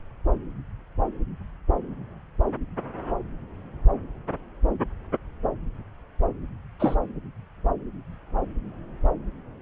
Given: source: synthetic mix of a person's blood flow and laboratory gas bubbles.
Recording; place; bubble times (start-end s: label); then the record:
Doppler ultrasound of blood flow; subclavian vein
6.79-6.95 s: bubbles
From the record:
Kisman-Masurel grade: 113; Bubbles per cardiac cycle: 1 to 2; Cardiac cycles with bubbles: 1 to 10%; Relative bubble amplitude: loud (0.450 to 0.775); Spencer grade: 1 (occasional bubble signal discernible with the cardiac motion signal, with majority of cardiac periods free of bubbles); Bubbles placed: anywhere in the cardiac cycle